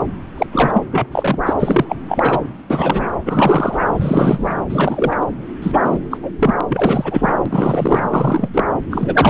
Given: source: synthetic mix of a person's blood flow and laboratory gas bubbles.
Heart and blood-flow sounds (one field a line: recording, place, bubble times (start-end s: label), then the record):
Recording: Doppler ultrasound of blood flow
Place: subclavian vein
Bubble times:
0.00-0.03 s: bubbles
0.38-0.47 s: bubbles
0.51-0.83 s: bubbles
0.91-1.06 s: bubbles
1.11-1.39 s: bubbles
1.46-1.54 s: bubbles
1.59-1.85 s: bubbles
1.88-1.96 s: bubbles
2.08-2.40 s: bubbles
2.70-3.11 s: bubbles
3.25-3.80 s: bubbles
3.98-4.54 s: bubbles
4.69-5.16 s: bubbles
5.21-5.26 s: bubbles
5.62-6.00 s: bubbles
6.11-6.18 s: bubbles
6.22-6.31 s: bubbles
6.39-6.54 s: bubbles
6.57-6.61 s: bubbles
6.68-7.33 s: bubbles
7.46-8.06 s: bubbles
8.09-8.49 s: bubbles
8.54-8.64 s: bubbles
8.91-9.30 s: bubbles
From the record:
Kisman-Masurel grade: 343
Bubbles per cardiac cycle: rolling drumbeat, 9 or more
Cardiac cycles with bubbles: 100%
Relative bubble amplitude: loud (0.450 to 0.775)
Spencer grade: 3 (all of the cardiac periods contain showers or single bubble signals, but not dominating or overriding the cardiac motion signals)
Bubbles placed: anywhere in the cardiac cycle